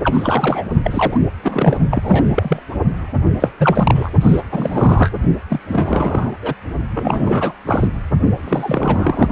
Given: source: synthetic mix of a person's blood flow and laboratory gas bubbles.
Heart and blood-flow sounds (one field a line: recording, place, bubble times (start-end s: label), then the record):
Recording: Doppler ultrasound of blood flow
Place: precordium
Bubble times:
0.04-0.67 s: bubbles
0.83-1.20 s: bubbles
1.43-1.77 s: bubbles
1.90-2.62 s: bubbles
3.40-3.50 s: bubbles
3.58-4.11 s: bubbles
4.21-4.41 s: bubbles
4.51-5.10 s: bubbles
5.50-5.59 s: bubbles
5.69-6.32 s: bubbles
6.42-6.54 s: bubbles
6.93-7.53 s: bubbles
7.67-7.87 s: bubbles
8.44-9.28 s: bubbles
From the record:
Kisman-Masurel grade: 342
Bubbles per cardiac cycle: rolling drumbeat, 9 or more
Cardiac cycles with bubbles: 100%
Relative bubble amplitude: moderate (0.250 to 0.450)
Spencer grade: 3 (all of the cardiac periods contain showers or single bubble signals, but not dominating or overriding the cardiac motion signals)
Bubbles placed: only in the low amplitude regions of the cardiac cycle